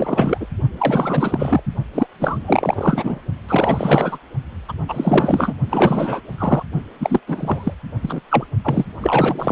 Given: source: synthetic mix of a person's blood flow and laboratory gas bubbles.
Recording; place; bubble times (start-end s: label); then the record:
Doppler ultrasound of blood flow; precordium
0.00-0.46 s: bubbles
0.77-1.63 s: bubbles
1.93-2.06 s: bubbles
2.21-3.21 s: bubbles
3.49-4.19 s: bubbles
4.68-4.73 s: bubbles
4.88-5.53 s: bubbles
5.70-6.21 s: bubbles
6.38-6.63 s: bubbles
7.00-7.20 s: bubbles
7.27-7.74 s: bubbles
8.02-8.21 s: bubbles
8.29-8.45 s: bubbles
8.63-8.85 s: bubbles
9.01-9.52 s: bubbles
From the record:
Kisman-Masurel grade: 444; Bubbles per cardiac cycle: continuous sound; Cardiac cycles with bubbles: 100%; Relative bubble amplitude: maximal (0.775 to 0.999); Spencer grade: 4 (maximum detectable bubble signal sounding continuously throughout systole and diastole of every cardiac period, and overriding the amplitude of the normal cardiac signals); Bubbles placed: only in the low amplitude regions of the cardiac cycle